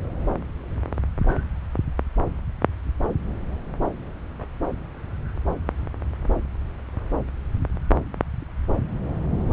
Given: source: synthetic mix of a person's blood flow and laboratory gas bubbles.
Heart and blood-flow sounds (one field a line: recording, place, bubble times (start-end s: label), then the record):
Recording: Doppler ultrasound of blood flow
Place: subclavian vein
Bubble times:
no bubbles
From the record:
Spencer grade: 0 (complete lack of bubble signals)